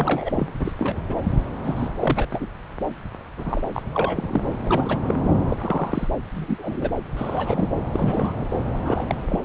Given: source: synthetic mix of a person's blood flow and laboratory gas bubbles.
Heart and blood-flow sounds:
Doppler ultrasound of blood flow; subclavian vein
0.00-0.52 s: bubbles
0.59-0.72 s: bubbles
0.79-1.01 s: bubbles
1.08-1.16 s: bubbles
1.64-1.88 s: bubbles
2.01-2.27 s: bubbles
2.31-2.50 s: bubbles
3.37-3.62 s: bubbles
3.74-3.83 s: bubbles
3.92-4.42 s: bubbles
4.65-4.98 s: bubbles
5.08-5.14 s: bubbles
5.48-6.08 s: bubbles
6.34-6.90 s: bubbles
7.17-7.68 s: bubbles
7.94-8.46 s: bubbles
8.85-9.15 s: bubbles
9.29-9.44 s: bubbles
From the record:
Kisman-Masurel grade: 242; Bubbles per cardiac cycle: several, 3 to 8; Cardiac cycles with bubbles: 100%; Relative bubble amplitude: moderate (0.250 to 0.450); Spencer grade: 3 (all of the cardiac periods contain showers or single bubble signals, but not dominating or overriding the cardiac motion signals); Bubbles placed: anywhere in the cardiac cycle

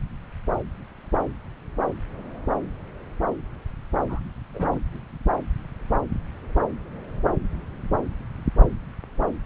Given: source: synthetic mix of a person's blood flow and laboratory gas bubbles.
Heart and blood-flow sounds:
Doppler ultrasound of blood flow; subclavian vein
4.08-4.20 s: bubbles
4.54-4.79 s: bubbles
From the record:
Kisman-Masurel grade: 111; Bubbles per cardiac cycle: 1 to 2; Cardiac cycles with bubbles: 1 to 10%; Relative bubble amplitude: barely perceptible (0.100 to 0.250); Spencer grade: 1 (occasional bubble signal discernible with the cardiac motion signal, with majority of cardiac periods free of bubbles); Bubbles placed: anywhere in the cardiac cycle

